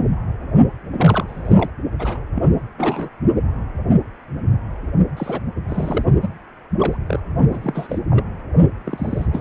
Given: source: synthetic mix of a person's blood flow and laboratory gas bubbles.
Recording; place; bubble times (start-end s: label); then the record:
Doppler ultrasound of blood flow; precordium
0.93-1.24 s: bubbles
1.27-1.70 s: bubbles
1.99-2.19 s: bubbles
2.35-2.44 s: bubbles
2.77-3.08 s: bubbles
5.17-5.41 s: bubbles
5.68-6.04 s: bubbles
6.21-6.29 s: bubbles
6.79-6.97 s: bubbles
7.07-7.20 s: bubbles
7.53-8.00 s: bubbles
8.10-8.24 s: bubbles
8.84-9.26 s: bubbles
9.31-9.41 s: bubbles
From the record:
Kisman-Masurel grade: 232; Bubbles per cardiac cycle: several, 3 to 8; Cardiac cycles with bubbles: 50 to 99%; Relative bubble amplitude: moderate (0.250 to 0.450); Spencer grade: 3 (all of the cardiac periods contain showers or single bubble signals, but not dominating or overriding the cardiac motion signals); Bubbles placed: only in the low amplitude regions of the cardiac cycle